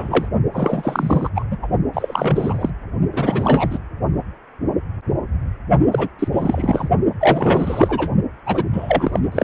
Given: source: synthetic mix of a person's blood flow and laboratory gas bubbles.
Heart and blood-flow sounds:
Doppler ultrasound of blood flow; precordium
0.00-0.30 s: bubbles
0.53-1.29 s: bubbles
1.35-1.44 s: bubbles
1.50-1.57 s: bubbles
1.62-1.68 s: bubbles
1.93-2.70 s: bubbles
3.12-3.78 s: bubbles
5.92-6.08 s: bubbles
6.18-6.28 s: bubbles
6.32-6.89 s: bubbles
7.21-8.10 s: bubbles
8.46-8.65 s: bubbles
8.73-9.44 s: bubbles
From the record:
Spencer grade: 3 (all of the cardiac periods contain showers or single bubble signals, but not dominating or overriding the cardiac motion signals); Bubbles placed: only in the low amplitude regions of the cardiac cycle

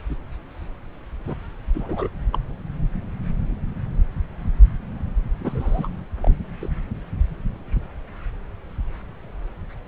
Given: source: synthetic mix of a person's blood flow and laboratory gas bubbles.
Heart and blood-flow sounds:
Doppler ultrasound of blood flow; subclavian vein
1.27-1.34 s: bubbles
1.73-2.08 s: bubbles
2.33-2.38 s: bubbles
5.40-5.89 s: bubbles
6.21-6.35 s: bubbles
6.61-6.69 s: bubbles
From the record:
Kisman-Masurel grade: 221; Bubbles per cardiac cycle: several, 3 to 8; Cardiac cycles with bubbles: 10 to 50%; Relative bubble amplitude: barely perceptible (0.100 to 0.250); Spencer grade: 2 (many but less than half of the cardiac periods contain bubble signals, singularly or in groups); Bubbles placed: anywhere in the cardiac cycle

